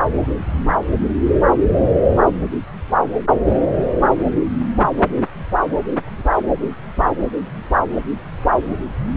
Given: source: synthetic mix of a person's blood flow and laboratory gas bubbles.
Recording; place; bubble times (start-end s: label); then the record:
Doppler ultrasound of blood flow; subclavian vein
no bubbles
From the record:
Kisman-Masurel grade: 000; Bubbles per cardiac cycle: 0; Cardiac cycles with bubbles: 0%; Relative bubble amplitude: no bubbles discernible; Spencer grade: 0 (complete lack of bubble signals)